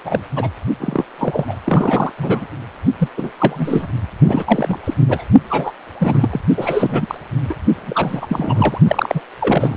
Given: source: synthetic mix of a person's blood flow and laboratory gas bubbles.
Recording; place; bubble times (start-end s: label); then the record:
Doppler ultrasound of blood flow; precordium
0.04-0.23 s: bubbles
0.36-0.51 s: bubbles
0.80-1.05 s: bubbles
1.18-1.57 s: bubbles
1.65-2.12 s: bubbles
2.18-2.46 s: bubbles
2.98-3.08 s: bubbles
3.17-3.29 s: bubbles
3.40-3.87 s: bubbles
4.27-4.79 s: bubbles
4.84-4.94 s: bubbles
5.08-5.24 s: bubbles
5.50-5.72 s: bubbles
5.99-6.41 s: bubbles
6.57-7.18 s: bubbles
7.49-7.55 s: bubbles
7.76-8.79 s: bubbles
8.88-9.21 s: bubbles
9.40-9.77 s: bubbles
From the record:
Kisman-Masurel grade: 332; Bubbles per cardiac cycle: rolling drumbeat, 9 or more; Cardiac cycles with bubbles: 50 to 99%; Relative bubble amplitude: moderate (0.250 to 0.450); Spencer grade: 3 (all of the cardiac periods contain showers or single bubble signals, but not dominating or overriding the cardiac motion signals); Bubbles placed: only in the low amplitude regions of the cardiac cycle